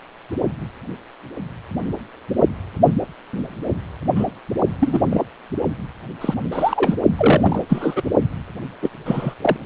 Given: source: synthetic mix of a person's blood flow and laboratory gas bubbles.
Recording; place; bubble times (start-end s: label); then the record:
Doppler ultrasound of blood flow; precordium
4.16-4.24 s: bubbles
4.80-5.00 s: bubbles
5.10-5.24 s: bubbles
6.21-6.34 s: bubbles
6.52-6.95 s: bubbles
7.18-7.62 s: bubbles
7.69-8.03 s: bubbles
8.82-8.89 s: bubbles
9.05-9.34 s: bubbles
9.41-9.56 s: bubbles
From the record:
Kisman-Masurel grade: 233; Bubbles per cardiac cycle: several, 3 to 8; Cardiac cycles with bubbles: 50 to 99%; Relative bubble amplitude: loud (0.450 to 0.775); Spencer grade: 3 (all of the cardiac periods contain showers or single bubble signals, but not dominating or overriding the cardiac motion signals); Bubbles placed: only in the low amplitude regions of the cardiac cycle